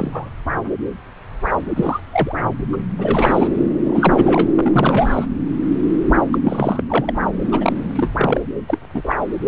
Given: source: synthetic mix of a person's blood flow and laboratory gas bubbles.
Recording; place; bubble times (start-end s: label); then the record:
Doppler ultrasound of blood flow; subclavian vein
0.00-0.30 s: bubbles
1.75-2.00 s: bubbles
2.12-2.35 s: bubbles
2.73-2.77 s: bubbles
2.98-3.49 s: bubbles
3.84-4.48 s: bubbles
4.54-5.26 s: bubbles
6.32-6.38 s: bubbles
6.44-6.83 s: bubbles
6.88-7.12 s: bubbles
7.51-7.73 s: bubbles
7.95-8.11 s: bubbles
8.17-8.40 s: bubbles
8.67-8.78 s: bubbles
8.94-9.01 s: bubbles
9.04-9.15 s: bubbles
From the record:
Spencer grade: 3 (all of the cardiac periods contain showers or single bubble signals, but not dominating or overriding the cardiac motion signals); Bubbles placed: anywhere in the cardiac cycle